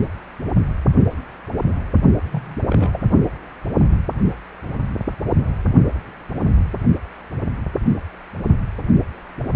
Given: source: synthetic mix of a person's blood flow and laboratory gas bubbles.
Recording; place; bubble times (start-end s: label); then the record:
Doppler ultrasound of blood flow; precordium
2.31-2.58 s: bubbles
2.69-3.06 s: bubbles
From the record:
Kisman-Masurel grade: 212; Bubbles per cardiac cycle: several, 3 to 8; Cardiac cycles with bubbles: 1 to 10%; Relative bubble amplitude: moderate (0.250 to 0.450); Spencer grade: 1 (occasional bubble signal discernible with the cardiac motion signal, with majority of cardiac periods free of bubbles); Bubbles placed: only in the low amplitude regions of the cardiac cycle